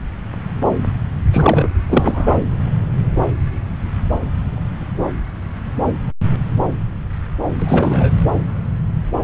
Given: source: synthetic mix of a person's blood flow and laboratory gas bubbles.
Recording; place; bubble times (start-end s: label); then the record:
Doppler ultrasound of blood flow; subclavian vein
1.32-1.69 s: bubbles
1.89-2.39 s: bubbles
7.59-8.10 s: bubbles
From the record:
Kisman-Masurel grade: 223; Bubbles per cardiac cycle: several, 3 to 8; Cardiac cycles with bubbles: 10 to 50%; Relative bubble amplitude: loud (0.450 to 0.775); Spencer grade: 2 (many but less than half of the cardiac periods contain bubble signals, singularly or in groups); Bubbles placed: anywhere in the cardiac cycle